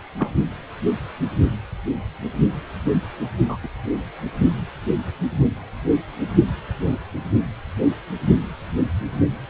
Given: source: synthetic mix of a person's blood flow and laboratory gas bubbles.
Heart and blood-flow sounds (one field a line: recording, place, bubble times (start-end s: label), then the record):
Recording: Doppler ultrasound of blood flow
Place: precordium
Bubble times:
0.18-0.32 s: bubbles
3.48-3.57 s: bubbles
3.63-3.67 s: bubbles
From the record:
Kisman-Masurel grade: 122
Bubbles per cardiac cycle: 1 to 2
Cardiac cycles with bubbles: 10 to 50%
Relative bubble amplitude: moderate (0.250 to 0.450)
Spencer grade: 2 (many but less than half of the cardiac periods contain bubble signals, singularly or in groups)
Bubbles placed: only in the low amplitude regions of the cardiac cycle